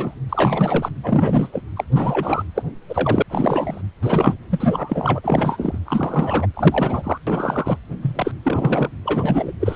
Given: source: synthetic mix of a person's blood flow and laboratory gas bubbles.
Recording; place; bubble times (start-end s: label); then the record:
Doppler ultrasound of blood flow; precordium
0.00-0.14 s: bubbles
0.29-0.90 s: bubbles
1.02-1.62 s: bubbles
1.76-1.84 s: bubbles
1.92-2.43 s: bubbles
2.55-2.62 s: bubbles
2.89-3.23 s: bubbles
3.30-3.81 s: bubbles
4.02-4.34 s: bubbles
4.50-5.20 s: bubbles
5.23-5.78 s: bubbles
5.85-6.46 s: bubbles
6.54-7.18 s: bubbles
7.26-7.76 s: bubbles
8.02-8.33 s: bubbles
8.43-8.89 s: bubbles
9.05-9.53 s: bubbles
9.61-9.76 s: bubbles
From the record:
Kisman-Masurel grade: 343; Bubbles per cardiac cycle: rolling drumbeat, 9 or more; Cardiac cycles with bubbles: 100%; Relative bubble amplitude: loud (0.450 to 0.775); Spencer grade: 3 (all of the cardiac periods contain showers or single bubble signals, but not dominating or overriding the cardiac motion signals); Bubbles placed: anywhere in the cardiac cycle